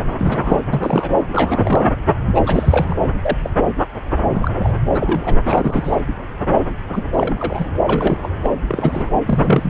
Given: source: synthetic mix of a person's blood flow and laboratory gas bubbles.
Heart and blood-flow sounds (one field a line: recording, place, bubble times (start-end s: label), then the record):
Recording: Doppler ultrasound of blood flow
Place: subclavian vein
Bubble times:
0.18-0.61 s: bubbles
0.72-1.22 s: bubbles
1.30-1.86 s: bubbles
2.35-2.42 s: bubbles
2.45-2.96 s: bubbles
3.03-3.08 s: bubbles
3.22-3.37 s: bubbles
3.44-3.51 s: bubbles
4.32-4.76 s: bubbles
4.92-5.39 s: bubbles
5.45-5.96 s: bubbles
6.92-7.04 s: bubbles
7.13-7.67 s: bubbles
7.85-8.18 s: bubbles
8.23-8.28 s: bubbles
8.42-8.50 s: bubbles
8.67-9.12 s: bubbles
9.26-9.70 s: bubbles
From the record:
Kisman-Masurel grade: 232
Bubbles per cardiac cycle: several, 3 to 8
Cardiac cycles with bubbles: 50 to 99%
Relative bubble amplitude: moderate (0.250 to 0.450)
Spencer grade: 3 (all of the cardiac periods contain showers or single bubble signals, but not dominating or overriding the cardiac motion signals)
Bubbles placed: anywhere in the cardiac cycle